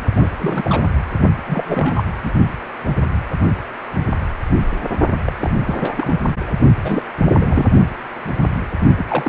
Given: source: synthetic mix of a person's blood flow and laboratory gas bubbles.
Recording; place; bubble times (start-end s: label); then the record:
Doppler ultrasound of blood flow; precordium
0.16-0.29 s: bubbles
0.40-0.92 s: bubbles
1.44-2.04 s: bubbles
2.22-2.32 s: bubbles
5.25-5.32 s: bubbles
5.40-5.50 s: bubbles
5.66-6.20 s: bubbles
6.46-6.51 s: bubbles
6.83-7.03 s: bubbles
7.17-7.66 s: bubbles
8.97-9.06 s: bubbles
9.09-9.29 s: bubbles
From the record:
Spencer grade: 3 (all of the cardiac periods contain showers or single bubble signals, but not dominating or overriding the cardiac motion signals); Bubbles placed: only in the low amplitude regions of the cardiac cycle